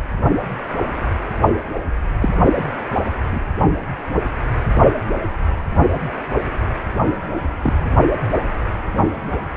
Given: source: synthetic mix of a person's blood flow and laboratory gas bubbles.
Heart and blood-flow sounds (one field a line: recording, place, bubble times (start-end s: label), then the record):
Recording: Doppler ultrasound of blood flow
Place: precordium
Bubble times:
1.74-1.80 s: bubbles
2.21-2.29 s: bubbles
3.31-3.40 s: bubbles
7.63-7.84 s: bubbles
From the record:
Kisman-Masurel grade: 122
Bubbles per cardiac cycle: 1 to 2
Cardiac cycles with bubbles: 10 to 50%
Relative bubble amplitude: moderate (0.250 to 0.450)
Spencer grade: 2 (many but less than half of the cardiac periods contain bubble signals, singularly or in groups)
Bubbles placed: only in the low amplitude regions of the cardiac cycle